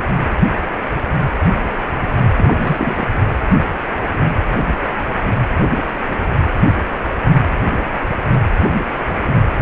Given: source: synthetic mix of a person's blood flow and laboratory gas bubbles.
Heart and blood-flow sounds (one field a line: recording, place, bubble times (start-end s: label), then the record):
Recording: Doppler ultrasound of blood flow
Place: precordium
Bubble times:
2.34-3.06 s: bubbles
From the record:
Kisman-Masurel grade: 212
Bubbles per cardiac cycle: several, 3 to 8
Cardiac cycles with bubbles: 1 to 10%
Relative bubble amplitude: moderate (0.250 to 0.450)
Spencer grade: 1 (occasional bubble signal discernible with the cardiac motion signal, with majority of cardiac periods free of bubbles)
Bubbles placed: anywhere in the cardiac cycle